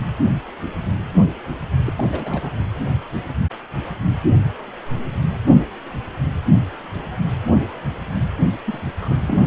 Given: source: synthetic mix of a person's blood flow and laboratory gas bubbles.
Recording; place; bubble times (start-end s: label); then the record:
Doppler ultrasound of blood flow; precordium
1.84-1.93 s: bubbles
1.97-2.08 s: bubbles
2.11-2.51 s: bubbles
8.65-8.81 s: bubbles
9.01-9.22 s: bubbles
9.28-9.47 s: bubbles
From the record:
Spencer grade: 2 (many but less than half of the cardiac periods contain bubble signals, singularly or in groups); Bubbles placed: anywhere in the cardiac cycle